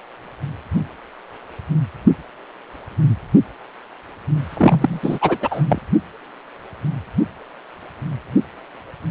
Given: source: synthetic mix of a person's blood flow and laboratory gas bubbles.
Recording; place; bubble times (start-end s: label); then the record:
Doppler ultrasound of blood flow; precordium
4.57-5.38 s: bubbles
5.41-5.62 s: bubbles
5.68-5.79 s: bubbles
From the record:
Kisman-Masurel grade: 223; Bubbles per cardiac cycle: several, 3 to 8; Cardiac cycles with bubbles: 10 to 50%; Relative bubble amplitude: loud (0.450 to 0.775); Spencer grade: 2 (many but less than half of the cardiac periods contain bubble signals, singularly or in groups); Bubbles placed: anywhere in the cardiac cycle